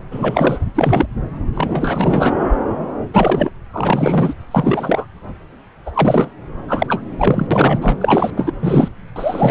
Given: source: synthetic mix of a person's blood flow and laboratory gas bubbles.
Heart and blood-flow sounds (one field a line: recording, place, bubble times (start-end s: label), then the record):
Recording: Doppler ultrasound of blood flow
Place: subclavian vein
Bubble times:
0.11-0.59 s: bubbles
0.74-1.06 s: bubbles
1.54-2.34 s: bubbles
3.12-3.50 s: bubbles
3.73-4.34 s: bubbles
4.51-5.05 s: bubbles
5.85-5.91 s: bubbles
5.94-6.31 s: bubbles
6.67-7.01 s: bubbles
7.18-7.46 s: bubbles
7.50-7.79 s: bubbles
7.81-8.30 s: bubbles
8.37-8.52 s: bubbles
8.62-8.88 s: bubbles
9.15-9.51 s: bubbles
From the record:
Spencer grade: 3 (all of the cardiac periods contain showers or single bubble signals, but not dominating or overriding the cardiac motion signals)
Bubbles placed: anywhere in the cardiac cycle